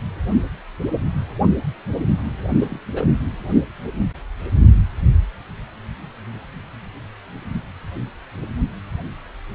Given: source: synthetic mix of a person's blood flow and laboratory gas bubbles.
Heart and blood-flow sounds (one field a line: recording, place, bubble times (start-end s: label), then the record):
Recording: Doppler ultrasound of blood flow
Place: precordium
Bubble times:
2.60-2.79 s: bubbles
2.95-3.07 s: bubbles
From the record:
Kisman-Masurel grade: 211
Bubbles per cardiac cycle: several, 3 to 8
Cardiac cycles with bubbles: 1 to 10%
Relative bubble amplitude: barely perceptible (0.100 to 0.250)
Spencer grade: 1 (occasional bubble signal discernible with the cardiac motion signal, with majority of cardiac periods free of bubbles)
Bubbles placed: anywhere in the cardiac cycle